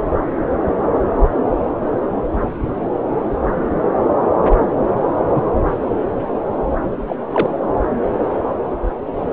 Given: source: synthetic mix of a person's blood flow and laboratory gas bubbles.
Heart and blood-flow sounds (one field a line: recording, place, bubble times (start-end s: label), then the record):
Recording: Doppler ultrasound of blood flow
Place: subclavian vein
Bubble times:
5.35-5.42 s: bubbles
7.07-7.16 s: bubbles
7.32-7.52 s: bubbles
From the record:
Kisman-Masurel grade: 122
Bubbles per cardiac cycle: 1 to 2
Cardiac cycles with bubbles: 10 to 50%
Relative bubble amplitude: moderate (0.250 to 0.450)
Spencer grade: 2 (many but less than half of the cardiac periods contain bubble signals, singularly or in groups)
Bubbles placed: anywhere in the cardiac cycle